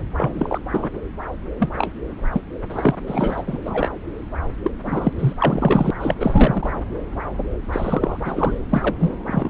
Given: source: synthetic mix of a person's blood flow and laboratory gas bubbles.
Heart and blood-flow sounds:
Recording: Doppler ultrasound of blood flow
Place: subclavian vein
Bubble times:
0.17-0.59 s: bubbles
0.71-0.88 s: bubbles
1.59-1.70 s: bubbles
1.76-1.92 s: bubbles
2.32-2.41 s: bubbles
2.70-2.95 s: bubbles
3.06-3.44 s: bubbles
3.47-3.58 s: bubbles
3.65-3.92 s: bubbles
4.63-4.71 s: bubbles
4.84-5.13 s: bubbles
5.19-5.33 s: bubbles
5.40-5.91 s: bubbles
6.00-6.15 s: bubbles
6.20-6.72 s: bubbles
7.72-8.58 s: bubbles
8.69-8.94 s: bubbles
8.99-9.15 s: bubbles
9.26-9.49 s: bubbles
From the record:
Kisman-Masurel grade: 343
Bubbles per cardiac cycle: rolling drumbeat, 9 or more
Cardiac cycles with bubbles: 100%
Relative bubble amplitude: loud (0.450 to 0.775)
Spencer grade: 3 (all of the cardiac periods contain showers or single bubble signals, but not dominating or overriding the cardiac motion signals)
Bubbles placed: anywhere in the cardiac cycle

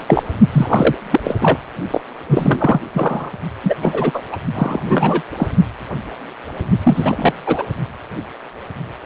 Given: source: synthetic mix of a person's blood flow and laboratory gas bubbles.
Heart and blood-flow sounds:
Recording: Doppler ultrasound of blood flow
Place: precordium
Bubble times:
0.00-0.03 s: bubbles
0.08-0.23 s: bubbles
0.52-0.95 s: bubbles
1.10-1.20 s: bubbles
1.24-1.35 s: bubbles
1.40-1.58 s: bubbles
1.90-2.01 s: bubbles
2.29-2.80 s: bubbles
2.94-3.31 s: bubbles
3.63-3.75 s: bubbles
3.82-4.22 s: bubbles
4.32-4.37 s: bubbles
4.55-4.79 s: bubbles
4.83-5.22 s: bubbles
5.37-5.47 s: bubbles
6.83-7.33 s: bubbles
7.46-7.64 s: bubbles
From the record:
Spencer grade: 3 (all of the cardiac periods contain showers or single bubble signals, but not dominating or overriding the cardiac motion signals)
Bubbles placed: only in the low amplitude regions of the cardiac cycle

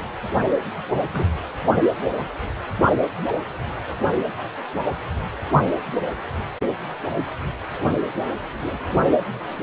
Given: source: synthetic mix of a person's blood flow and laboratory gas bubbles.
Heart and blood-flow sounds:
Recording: Doppler ultrasound of blood flow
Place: precordium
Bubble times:
1.12-1.26 s: bubbles
3.89-3.93 s: bubbles
From the record:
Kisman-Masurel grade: 121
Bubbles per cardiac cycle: 1 to 2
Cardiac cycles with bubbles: 10 to 50%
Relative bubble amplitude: barely perceptible (0.100 to 0.250)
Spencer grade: 2 (many but less than half of the cardiac periods contain bubble signals, singularly or in groups)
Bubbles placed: only in the low amplitude regions of the cardiac cycle

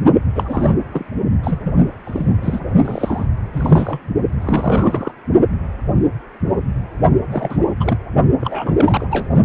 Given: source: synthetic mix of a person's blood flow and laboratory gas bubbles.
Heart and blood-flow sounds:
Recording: Doppler ultrasound of blood flow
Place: precordium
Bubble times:
0.35-0.76 s: bubbles
0.91-1.05 s: bubbles
1.43-1.59 s: bubbles
1.64-1.76 s: bubbles
2.05-2.73 s: bubbles
2.85-3.27 s: bubbles
3.52-4.10 s: bubbles
4.40-5.12 s: bubbles
7.32-7.57 s: bubbles
7.80-7.97 s: bubbles
8.40-8.74 s: bubbles
8.77-9.07 s: bubbles
9.10-9.28 s: bubbles
From the record:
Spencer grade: 3 (all of the cardiac periods contain showers or single bubble signals, but not dominating or overriding the cardiac motion signals)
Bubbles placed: only in the low amplitude regions of the cardiac cycle

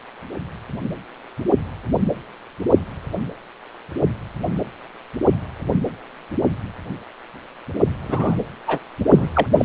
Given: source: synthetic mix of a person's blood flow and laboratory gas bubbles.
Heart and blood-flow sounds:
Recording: Doppler ultrasound of blood flow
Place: precordium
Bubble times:
8.08-8.39 s: bubbles
8.67-8.79 s: bubbles
9.10-9.29 s: bubbles
9.34-9.46 s: bubbles
9.57-9.65 s: bubbles
From the record:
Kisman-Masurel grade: 222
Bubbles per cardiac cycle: several, 3 to 8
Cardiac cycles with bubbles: 10 to 50%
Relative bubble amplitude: moderate (0.250 to 0.450)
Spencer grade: 2 (many but less than half of the cardiac periods contain bubble signals, singularly or in groups)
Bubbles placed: anywhere in the cardiac cycle

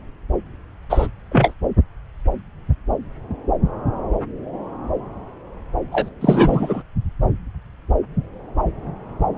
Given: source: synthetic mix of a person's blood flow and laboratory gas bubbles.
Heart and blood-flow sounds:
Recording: Doppler ultrasound of blood flow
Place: subclavian vein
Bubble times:
0.90-1.07 s: bubbles
1.31-1.54 s: bubbles
5.91-6.10 s: bubbles
6.21-6.82 s: bubbles
From the record:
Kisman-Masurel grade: 223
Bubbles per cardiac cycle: several, 3 to 8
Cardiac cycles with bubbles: 10 to 50%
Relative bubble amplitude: loud (0.450 to 0.775)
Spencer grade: 2 (many but less than half of the cardiac periods contain bubble signals, singularly or in groups)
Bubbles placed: anywhere in the cardiac cycle

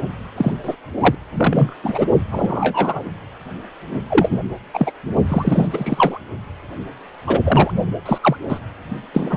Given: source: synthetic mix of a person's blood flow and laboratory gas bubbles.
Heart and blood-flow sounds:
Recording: Doppler ultrasound of blood flow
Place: precordium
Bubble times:
0.37-0.52 s: bubbles
0.63-0.76 s: bubbles
1.00-1.15 s: bubbles
1.38-1.74 s: bubbles
1.84-2.05 s: bubbles
2.31-3.10 s: bubbles
4.10-4.38 s: bubbles
4.73-4.92 s: bubbles
5.29-6.18 s: bubbles
7.27-7.40 s: bubbles
7.44-7.71 s: bubbles
8.05-8.19 s: bubbles
8.22-8.37 s: bubbles
8.48-8.60 s: bubbles
9.13-9.37 s: bubbles
From the record:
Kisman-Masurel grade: 243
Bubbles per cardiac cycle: several, 3 to 8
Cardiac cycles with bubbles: 100%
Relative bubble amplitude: loud (0.450 to 0.775)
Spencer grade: 3 (all of the cardiac periods contain showers or single bubble signals, but not dominating or overriding the cardiac motion signals)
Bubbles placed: only in the low amplitude regions of the cardiac cycle

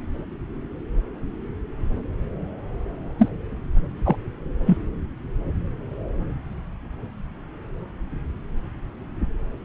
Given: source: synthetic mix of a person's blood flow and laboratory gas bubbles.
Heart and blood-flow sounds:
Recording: Doppler ultrasound of blood flow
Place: subclavian vein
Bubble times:
3.18-3.29 s: bubbles
4.05-4.16 s: bubbles
4.65-4.78 s: bubbles
From the record:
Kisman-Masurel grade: 123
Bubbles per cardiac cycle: 1 to 2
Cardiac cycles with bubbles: 10 to 50%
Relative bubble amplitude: loud (0.450 to 0.775)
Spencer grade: 2 (many but less than half of the cardiac periods contain bubble signals, singularly or in groups)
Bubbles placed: anywhere in the cardiac cycle

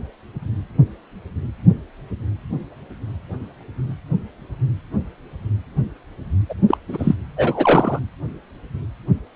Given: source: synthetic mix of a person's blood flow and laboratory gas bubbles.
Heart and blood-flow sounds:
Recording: Doppler ultrasound of blood flow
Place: precordium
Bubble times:
6.49-6.54 s: bubbles
6.68-6.78 s: bubbles
6.88-7.14 s: bubbles
7.36-7.99 s: bubbles
From the record:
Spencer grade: 2 (many but less than half of the cardiac periods contain bubble signals, singularly or in groups)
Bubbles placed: anywhere in the cardiac cycle

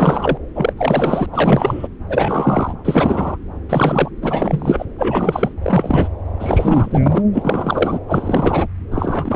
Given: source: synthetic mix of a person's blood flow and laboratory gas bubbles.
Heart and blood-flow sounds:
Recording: Doppler ultrasound of blood flow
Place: subclavian vein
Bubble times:
0.00-0.38 s: bubbles
0.55-0.73 s: bubbles
0.77-1.26 s: bubbles
1.32-1.88 s: bubbles
2.09-2.73 s: bubbles
2.84-3.38 s: bubbles
3.69-4.10 s: bubbles
4.22-4.86 s: bubbles
4.99-5.53 s: bubbles
5.62-6.08 s: bubbles
6.40-7.22 s: bubbles
7.33-7.99 s: bubbles
8.08-8.68 s: bubbles
8.91-9.36 s: bubbles
From the record:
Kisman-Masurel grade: 343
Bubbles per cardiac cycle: rolling drumbeat, 9 or more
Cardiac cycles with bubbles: 100%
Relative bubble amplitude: loud (0.450 to 0.775)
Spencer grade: 3 (all of the cardiac periods contain showers or single bubble signals, but not dominating or overriding the cardiac motion signals)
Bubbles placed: anywhere in the cardiac cycle

